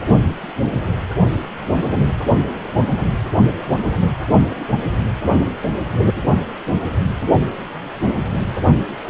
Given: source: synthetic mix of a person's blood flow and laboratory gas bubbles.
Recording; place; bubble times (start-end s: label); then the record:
Doppler ultrasound of blood flow; precordium
no bubbles
From the record:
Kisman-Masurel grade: 000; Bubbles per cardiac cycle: 0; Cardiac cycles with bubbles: 0%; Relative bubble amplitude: no bubbles discernible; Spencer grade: 0 (complete lack of bubble signals)